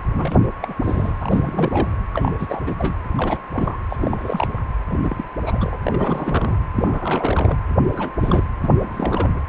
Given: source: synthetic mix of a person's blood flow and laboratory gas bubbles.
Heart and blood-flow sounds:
Doppler ultrasound of blood flow; precordium
0.15-0.47 s: bubbles
0.62-0.74 s: bubbles
0.84-1.18 s: bubbles
1.21-1.99 s: bubbles
2.13-2.32 s: bubbles
2.39-2.61 s: bubbles
2.67-2.75 s: bubbles
2.77-2.96 s: bubbles
3.16-3.38 s: bubbles
3.53-3.79 s: bubbles
3.90-4.62 s: bubbles
4.90-4.97 s: bubbles
5.02-5.24 s: bubbles
5.46-5.77 s: bubbles
5.85-6.57 s: bubbles
6.74-7.58 s: bubbles
7.89-8.12 s: bubbles
8.20-8.44 s: bubbles
8.59-9.43 s: bubbles
From the record:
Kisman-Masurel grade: 342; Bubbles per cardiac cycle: rolling drumbeat, 9 or more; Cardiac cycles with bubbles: 100%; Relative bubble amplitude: moderate (0.250 to 0.450); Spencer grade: 3 (all of the cardiac periods contain showers or single bubble signals, but not dominating or overriding the cardiac motion signals); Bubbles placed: anywhere in the cardiac cycle

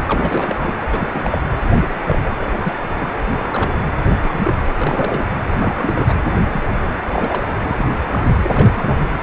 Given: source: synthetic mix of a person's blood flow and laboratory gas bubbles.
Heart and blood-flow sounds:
Doppler ultrasound of blood flow; precordium
0.09-0.56 s: bubbles
0.59-0.74 s: bubbles
0.91-1.08 s: bubbles
1.12-1.38 s: bubbles
1.81-1.93 s: bubbles
2.06-2.19 s: bubbles
2.25-2.30 s: bubbles
2.40-2.50 s: bubbles
2.64-2.73 s: bubbles
2.88-3.11 s: bubbles
3.37-3.72 s: bubbles
4.10-4.20 s: bubbles
4.23-4.54 s: bubbles
4.78-5.30 s: bubbles
5.58-6.15 s: bubbles
6.53-6.67 s: bubbles
7.09-7.47 s: bubbles
7.63-7.95 s: bubbles
8.11-8.27 s: bubbles
8.42-9.06 s: bubbles
From the record:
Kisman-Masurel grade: 242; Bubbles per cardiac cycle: several, 3 to 8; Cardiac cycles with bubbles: 100%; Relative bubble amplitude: moderate (0.250 to 0.450); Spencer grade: 3 (all of the cardiac periods contain showers or single bubble signals, but not dominating or overriding the cardiac motion signals); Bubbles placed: anywhere in the cardiac cycle

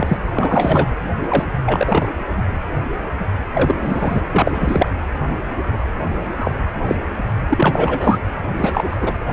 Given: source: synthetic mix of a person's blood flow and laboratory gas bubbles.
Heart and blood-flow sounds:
Doppler ultrasound of blood flow; precordium
0.00-0.18 s: bubbles
0.33-0.87 s: bubbles
1.28-1.45 s: bubbles
1.66-2.12 s: bubbles
3.53-3.75 s: bubbles
3.81-4.21 s: bubbles
4.32-4.88 s: bubbles
6.39-6.51 s: bubbles
6.85-6.95 s: bubbles
7.48-8.19 s: bubbles
8.56-8.98 s: bubbles
9.01-9.12 s: bubbles
From the record:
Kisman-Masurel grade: 233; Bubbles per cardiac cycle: several, 3 to 8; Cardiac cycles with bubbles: 50 to 99%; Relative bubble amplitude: loud (0.450 to 0.775); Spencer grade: 3 (all of the cardiac periods contain showers or single bubble signals, but not dominating or overriding the cardiac motion signals); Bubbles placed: anywhere in the cardiac cycle

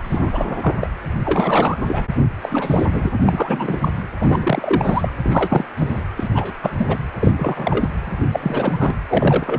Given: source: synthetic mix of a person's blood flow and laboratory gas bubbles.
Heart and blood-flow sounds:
Doppler ultrasound of blood flow; precordium
0.03-0.30 s: bubbles
0.32-0.73 s: bubbles
0.80-0.90 s: bubbles
1.25-2.04 s: bubbles
2.42-2.86 s: bubbles
2.92-3.10 s: bubbles
3.26-3.88 s: bubbles
4.19-5.13 s: bubbles
5.23-5.66 s: bubbles
5.76-6.02 s: bubbles
6.16-6.29 s: bubbles
6.34-6.52 s: bubbles
6.62-6.70 s: bubbles
6.78-6.97 s: bubbles
7.21-7.90 s: bubbles
8.05-8.96 s: bubbles
9.09-9.59 s: bubbles
From the record:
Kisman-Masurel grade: 343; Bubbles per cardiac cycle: rolling drumbeat, 9 or more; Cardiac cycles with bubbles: 100%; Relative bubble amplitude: loud (0.450 to 0.775); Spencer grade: 3 (all of the cardiac periods contain showers or single bubble signals, but not dominating or overriding the cardiac motion signals); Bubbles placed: anywhere in the cardiac cycle

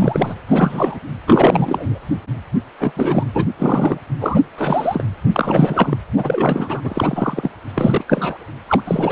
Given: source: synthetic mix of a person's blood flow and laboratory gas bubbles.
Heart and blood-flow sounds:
Doppler ultrasound of blood flow; precordium
0.00-0.35 s: bubbles
0.49-0.99 s: bubbles
1.26-1.99 s: bubbles
2.80-2.93 s: bubbles
2.96-3.23 s: bubbles
3.33-3.48 s: bubbles
3.59-3.98 s: bubbles
4.20-4.40 s: bubbles
4.58-5.03 s: bubbles
5.32-5.97 s: bubbles
6.16-6.81 s: bubbles
6.83-7.51 s: bubbles
7.75-8.04 s: bubbles
8.08-8.44 s: bubbles
8.69-8.81 s: bubbles
8.86-9.12 s: bubbles
From the record:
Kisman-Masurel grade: 342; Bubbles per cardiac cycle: rolling drumbeat, 9 or more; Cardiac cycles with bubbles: 100%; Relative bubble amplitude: moderate (0.250 to 0.450); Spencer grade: 3 (all of the cardiac periods contain showers or single bubble signals, but not dominating or overriding the cardiac motion signals); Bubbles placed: anywhere in the cardiac cycle

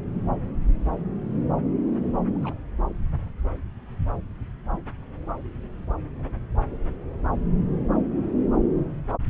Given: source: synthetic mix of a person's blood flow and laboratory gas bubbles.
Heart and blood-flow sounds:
Doppler ultrasound of blood flow; subclavian vein
2.33-2.54 s: bubbles
From the record:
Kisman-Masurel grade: 111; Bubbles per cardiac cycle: 1 to 2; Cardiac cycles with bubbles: 1 to 10%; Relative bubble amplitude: barely perceptible (0.100 to 0.250); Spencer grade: 1 (occasional bubble signal discernible with the cardiac motion signal, with majority of cardiac periods free of bubbles); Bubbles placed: anywhere in the cardiac cycle

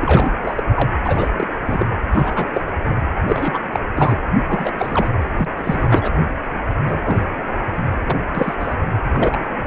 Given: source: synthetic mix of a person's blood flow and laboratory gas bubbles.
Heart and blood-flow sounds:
Doppler ultrasound of blood flow; precordium
0.01-0.31 s: bubbles
0.42-0.64 s: bubbles
0.74-0.89 s: bubbles
1.04-1.30 s: bubbles
1.38-1.47 s: bubbles
1.65-1.86 s: bubbles
2.12-2.63 s: bubbles
2.67-2.71 s: bubbles
2.85-2.96 s: bubbles
3.27-3.59 s: bubbles
3.72-3.79 s: bubbles
3.96-4.17 s: bubbles
4.48-4.71 s: bubbles
4.79-5.09 s: bubbles
5.37-5.46 s: bubbles
5.56-6.12 s: bubbles
6.86-7.00 s: bubbles
7.04-7.20 s: bubbles
8.06-8.16 s: bubbles
8.35-8.54 s: bubbles
8.60-8.74 s: bubbles
9.03-9.65 s: bubbles
From the record:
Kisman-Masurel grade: 242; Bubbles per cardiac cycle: several, 3 to 8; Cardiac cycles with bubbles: 100%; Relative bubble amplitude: moderate (0.250 to 0.450); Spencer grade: 3 (all of the cardiac periods contain showers or single bubble signals, but not dominating or overriding the cardiac motion signals); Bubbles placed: anywhere in the cardiac cycle

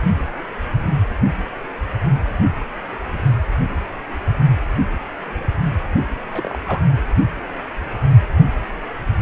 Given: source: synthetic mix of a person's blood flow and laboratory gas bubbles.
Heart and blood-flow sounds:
Doppler ultrasound of blood flow; precordium
6.32-6.59 s: bubbles
6.66-6.84 s: bubbles
From the record:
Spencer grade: 1 (occasional bubble signal discernible with the cardiac motion signal, with majority of cardiac periods free of bubbles); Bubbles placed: only in the low amplitude regions of the cardiac cycle

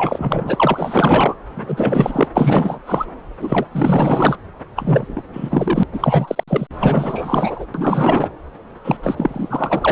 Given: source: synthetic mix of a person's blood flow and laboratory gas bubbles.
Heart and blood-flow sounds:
Doppler ultrasound of blood flow; subclavian vein
0.00-1.35 s: bubbles
1.49-2.27 s: bubbles
2.35-2.79 s: bubbles
2.86-3.06 s: bubbles
3.40-3.65 s: bubbles
3.71-4.37 s: bubbles
4.76-5.23 s: bubbles
5.33-5.84 s: bubbles
5.93-6.44 s: bubbles
6.48-6.67 s: bubbles
6.79-7.66 s: bubbles
7.74-8.29 s: bubbles
8.84-8.97 s: bubbles
9.03-9.92 s: bubbles
From the record:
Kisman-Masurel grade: 444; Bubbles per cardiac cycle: continuous sound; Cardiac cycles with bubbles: 100%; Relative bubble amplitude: maximal (0.775 to 0.999); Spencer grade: 4 (maximum detectable bubble signal sounding continuously throughout systole and diastole of every cardiac period, and overriding the amplitude of the normal cardiac signals); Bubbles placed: anywhere in the cardiac cycle

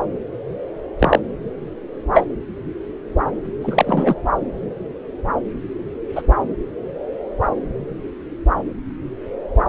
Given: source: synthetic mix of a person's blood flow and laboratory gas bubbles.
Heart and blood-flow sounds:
Doppler ultrasound of blood flow; subclavian vein
0.99-1.19 s: bubbles
2.13-2.24 s: bubbles
3.61-4.14 s: bubbles
6.16-6.22 s: bubbles
From the record:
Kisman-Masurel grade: 123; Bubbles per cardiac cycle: 1 to 2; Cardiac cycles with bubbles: 10 to 50%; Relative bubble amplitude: loud (0.450 to 0.775); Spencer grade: 2 (many but less than half of the cardiac periods contain bubble signals, singularly or in groups); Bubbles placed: anywhere in the cardiac cycle

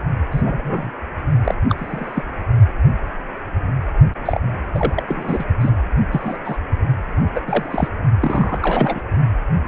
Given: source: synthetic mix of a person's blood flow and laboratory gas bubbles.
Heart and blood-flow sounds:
Doppler ultrasound of blood flow; precordium
0.31-0.90 s: bubbles
1.44-1.55 s: bubbles
1.69-2.25 s: bubbles
4.25-4.41 s: bubbles
4.75-5.03 s: bubbles
5.07-5.45 s: bubbles
5.59-5.71 s: bubbles
6.12-6.37 s: bubbles
6.45-6.58 s: bubbles
7.34-7.41 s: bubbles
7.46-7.88 s: bubbles
8.21-9.02 s: bubbles
From the record:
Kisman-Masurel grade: 232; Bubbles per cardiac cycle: several, 3 to 8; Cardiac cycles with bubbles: 50 to 99%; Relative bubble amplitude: moderate (0.250 to 0.450); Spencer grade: 3 (all of the cardiac periods contain showers or single bubble signals, but not dominating or overriding the cardiac motion signals); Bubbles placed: only in the low amplitude regions of the cardiac cycle

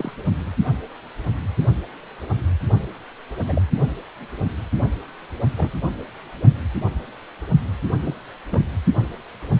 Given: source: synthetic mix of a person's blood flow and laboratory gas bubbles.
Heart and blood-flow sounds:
Doppler ultrasound of blood flow; precordium
0.00-0.12 s: bubbles
3.47-3.62 s: bubbles
5.58-5.73 s: bubbles
8.04-8.14 s: bubbles
8.51-8.65 s: bubbles
From the record:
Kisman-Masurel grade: 121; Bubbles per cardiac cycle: 1 to 2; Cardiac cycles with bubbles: 10 to 50%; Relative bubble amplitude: barely perceptible (0.100 to 0.250); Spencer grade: 2 (many but less than half of the cardiac periods contain bubble signals, singularly or in groups); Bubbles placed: only in the low amplitude regions of the cardiac cycle

